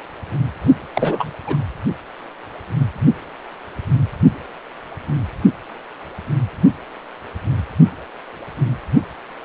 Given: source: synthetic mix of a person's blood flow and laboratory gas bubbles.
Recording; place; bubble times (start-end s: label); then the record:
Doppler ultrasound of blood flow; precordium
0.94-1.33 s: bubbles
1.45-1.57 s: bubbles
From the record:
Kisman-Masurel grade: 212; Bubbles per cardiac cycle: several, 3 to 8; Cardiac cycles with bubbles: 1 to 10%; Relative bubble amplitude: moderate (0.250 to 0.450); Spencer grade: 1 (occasional bubble signal discernible with the cardiac motion signal, with majority of cardiac periods free of bubbles); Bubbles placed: only in the low amplitude regions of the cardiac cycle